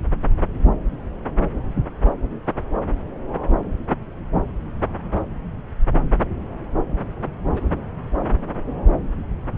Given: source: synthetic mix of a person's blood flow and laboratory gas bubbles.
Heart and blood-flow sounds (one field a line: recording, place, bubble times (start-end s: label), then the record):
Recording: Doppler ultrasound of blood flow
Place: subclavian vein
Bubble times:
7.52-7.62 s: bubbles
From the record:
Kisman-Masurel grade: 111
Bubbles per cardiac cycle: 1 to 2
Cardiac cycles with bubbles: 1 to 10%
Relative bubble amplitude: barely perceptible (0.100 to 0.250)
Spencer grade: 1 (occasional bubble signal discernible with the cardiac motion signal, with majority of cardiac periods free of bubbles)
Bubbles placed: anywhere in the cardiac cycle